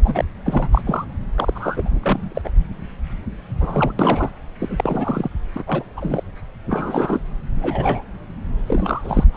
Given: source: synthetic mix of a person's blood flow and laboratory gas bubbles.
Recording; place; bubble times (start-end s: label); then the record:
Doppler ultrasound of blood flow; subclavian vein
0.04-0.24 s: bubbles
0.45-0.68 s: bubbles
0.72-0.81 s: bubbles
0.86-1.05 s: bubbles
1.36-1.99 s: bubbles
2.03-2.52 s: bubbles
3.60-3.94 s: bubbles
3.99-4.29 s: bubbles
4.59-5.29 s: bubbles
5.55-5.63 s: bubbles
5.67-5.83 s: bubbles
5.96-6.23 s: bubbles
6.69-7.20 s: bubbles
7.57-8.03 s: bubbles
8.68-9.24 s: bubbles
9.32-9.37 s: bubbles
From the record:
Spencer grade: 3 (all of the cardiac periods contain showers or single bubble signals, but not dominating or overriding the cardiac motion signals); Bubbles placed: anywhere in the cardiac cycle